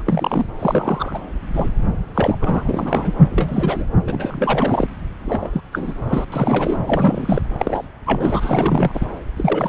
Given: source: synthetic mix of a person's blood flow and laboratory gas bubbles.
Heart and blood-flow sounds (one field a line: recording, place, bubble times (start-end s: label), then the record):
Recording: Doppler ultrasound of blood flow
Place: subclavian vein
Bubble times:
0.00-0.02 s: bubbles
0.06-0.46 s: bubbles
0.59-1.19 s: bubbles
1.53-1.69 s: bubbles
2.15-3.13 s: bubbles
3.32-3.87 s: bubbles
4.07-4.87 s: bubbles
5.25-5.61 s: bubbles
5.72-5.94 s: bubbles
6.05-6.25 s: bubbles
6.32-6.77 s: bubbles
6.86-7.42 s: bubbles
7.58-7.89 s: bubbles
8.06-9.06 s: bubbles
9.36-9.69 s: bubbles
From the record:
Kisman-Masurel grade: 342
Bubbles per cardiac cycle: rolling drumbeat, 9 or more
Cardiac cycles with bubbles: 100%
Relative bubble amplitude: moderate (0.250 to 0.450)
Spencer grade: 3 (all of the cardiac periods contain showers or single bubble signals, but not dominating or overriding the cardiac motion signals)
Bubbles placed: anywhere in the cardiac cycle